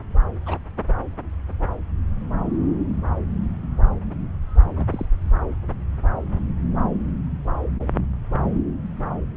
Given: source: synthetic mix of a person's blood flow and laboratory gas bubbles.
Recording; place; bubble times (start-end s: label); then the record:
Doppler ultrasound of blood flow; subclavian vein
0.46-0.58 s: bubbles
4.76-4.86 s: bubbles
4.90-5.06 s: bubbles
From the record:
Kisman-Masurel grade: 111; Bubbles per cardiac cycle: 1 to 2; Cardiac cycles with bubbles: 1 to 10%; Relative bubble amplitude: barely perceptible (0.100 to 0.250); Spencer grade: 1 (occasional bubble signal discernible with the cardiac motion signal, with majority of cardiac periods free of bubbles); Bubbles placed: anywhere in the cardiac cycle